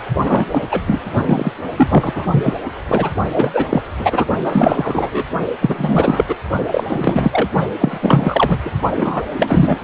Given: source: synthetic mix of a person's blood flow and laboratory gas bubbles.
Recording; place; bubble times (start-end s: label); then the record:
Doppler ultrasound of blood flow; precordium
0.23-0.45 s: bubbles
0.51-0.61 s: bubbles
0.71-1.00 s: bubbles
1.25-1.52 s: bubbles
1.76-2.26 s: bubbles
2.31-2.55 s: bubbles
2.88-3.10 s: bubbles
3.34-3.50 s: bubbles
3.54-3.66 s: bubbles
3.69-3.81 s: bubbles
3.97-4.25 s: bubbles
4.39-5.25 s: bubbles
5.61-6.24 s: bubbles
6.28-6.35 s: bubbles
6.71-6.87 s: bubbles
6.89-7.48 s: bubbles
7.78-7.98 s: bubbles
8.01-8.60 s: bubbles
8.65-8.71 s: bubbles
8.97-9.22 s: bubbles
9.38-9.79 s: bubbles
From the record:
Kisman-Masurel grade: 343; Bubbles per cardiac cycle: rolling drumbeat, 9 or more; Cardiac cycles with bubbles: 100%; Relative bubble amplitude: loud (0.450 to 0.775); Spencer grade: 3 (all of the cardiac periods contain showers or single bubble signals, but not dominating or overriding the cardiac motion signals); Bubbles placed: only in the low amplitude regions of the cardiac cycle